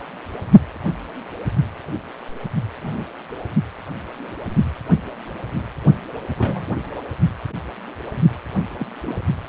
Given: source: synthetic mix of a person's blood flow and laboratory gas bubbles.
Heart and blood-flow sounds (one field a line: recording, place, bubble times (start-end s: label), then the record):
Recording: Doppler ultrasound of blood flow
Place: precordium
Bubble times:
2.80-3.05 s: bubbles
6.37-6.66 s: bubbles
8.79-8.86 s: bubbles
9.01-9.17 s: bubbles
From the record:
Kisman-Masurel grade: 121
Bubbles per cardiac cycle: 1 to 2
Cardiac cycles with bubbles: 10 to 50%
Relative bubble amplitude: barely perceptible (0.100 to 0.250)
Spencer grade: 2 (many but less than half of the cardiac periods contain bubble signals, singularly or in groups)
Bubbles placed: only in the low amplitude regions of the cardiac cycle